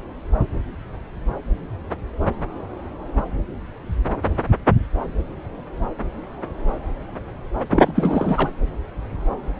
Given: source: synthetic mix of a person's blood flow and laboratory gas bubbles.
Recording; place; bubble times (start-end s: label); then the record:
Doppler ultrasound of blood flow; subclavian vein
7.71-7.92 s: bubbles
7.95-8.49 s: bubbles
From the record:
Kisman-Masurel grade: 213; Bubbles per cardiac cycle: several, 3 to 8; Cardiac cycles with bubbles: 1 to 10%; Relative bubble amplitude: loud (0.450 to 0.775); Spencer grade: 1 (occasional bubble signal discernible with the cardiac motion signal, with majority of cardiac periods free of bubbles); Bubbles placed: anywhere in the cardiac cycle